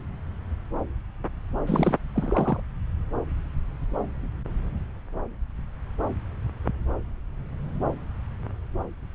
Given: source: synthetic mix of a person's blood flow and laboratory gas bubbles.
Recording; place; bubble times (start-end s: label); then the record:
Doppler ultrasound of blood flow; subclavian vein
1.67-1.96 s: bubbles
2.15-2.60 s: bubbles
From the record:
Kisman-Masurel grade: 211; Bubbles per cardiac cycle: several, 3 to 8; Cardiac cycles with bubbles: 1 to 10%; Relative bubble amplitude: barely perceptible (0.100 to 0.250); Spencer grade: 1 (occasional bubble signal discernible with the cardiac motion signal, with majority of cardiac periods free of bubbles); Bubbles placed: anywhere in the cardiac cycle